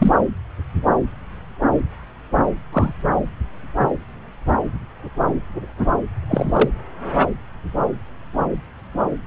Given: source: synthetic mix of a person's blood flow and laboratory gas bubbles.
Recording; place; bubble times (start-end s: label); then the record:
Doppler ultrasound of blood flow; subclavian vein
0.00-0.14 s: bubbles
2.73-2.94 s: bubbles
6.28-6.70 s: bubbles
From the record:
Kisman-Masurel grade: 123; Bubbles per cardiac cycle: 1 to 2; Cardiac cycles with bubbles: 10 to 50%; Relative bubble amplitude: loud (0.450 to 0.775); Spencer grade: 2 (many but less than half of the cardiac periods contain bubble signals, singularly or in groups); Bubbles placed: anywhere in the cardiac cycle